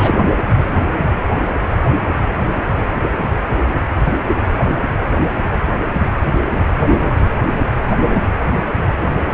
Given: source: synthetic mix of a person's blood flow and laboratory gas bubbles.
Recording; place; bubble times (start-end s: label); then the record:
Doppler ultrasound of blood flow; precordium
0.00-0.28 s: bubbles
From the record:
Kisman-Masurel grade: 212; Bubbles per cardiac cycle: several, 3 to 8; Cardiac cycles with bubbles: 1 to 10%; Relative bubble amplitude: moderate (0.250 to 0.450); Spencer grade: 1 (occasional bubble signal discernible with the cardiac motion signal, with majority of cardiac periods free of bubbles); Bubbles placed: anywhere in the cardiac cycle